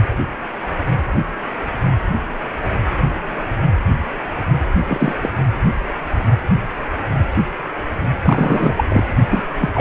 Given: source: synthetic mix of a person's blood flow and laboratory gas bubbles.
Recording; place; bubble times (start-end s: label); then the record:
Doppler ultrasound of blood flow; precordium
4.88-5.14 s: bubbles
5.21-5.29 s: bubbles
8.23-8.85 s: bubbles
8.88-9.04 s: bubbles
9.29-9.43 s: bubbles
9.57-9.70 s: bubbles
9.74-9.81 s: bubbles
From the record:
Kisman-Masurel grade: 223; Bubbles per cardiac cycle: several, 3 to 8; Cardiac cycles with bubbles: 10 to 50%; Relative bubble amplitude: loud (0.450 to 0.775); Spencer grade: 2 (many but less than half of the cardiac periods contain bubble signals, singularly or in groups); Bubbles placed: anywhere in the cardiac cycle